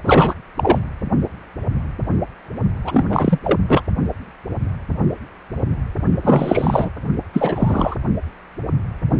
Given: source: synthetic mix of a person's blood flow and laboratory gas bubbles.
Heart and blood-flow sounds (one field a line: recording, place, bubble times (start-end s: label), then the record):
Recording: Doppler ultrasound of blood flow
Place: precordium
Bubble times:
0.04-0.34 s: bubbles
0.56-0.79 s: bubbles
2.83-3.40 s: bubbles
3.44-3.58 s: bubbles
3.67-3.81 s: bubbles
6.22-6.89 s: bubbles
7.33-7.96 s: bubbles
From the record:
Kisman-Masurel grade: 333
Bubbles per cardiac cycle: rolling drumbeat, 9 or more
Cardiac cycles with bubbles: 50 to 99%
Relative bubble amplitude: loud (0.450 to 0.775)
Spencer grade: 3 (all of the cardiac periods contain showers or single bubble signals, but not dominating or overriding the cardiac motion signals)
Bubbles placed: only in the low amplitude regions of the cardiac cycle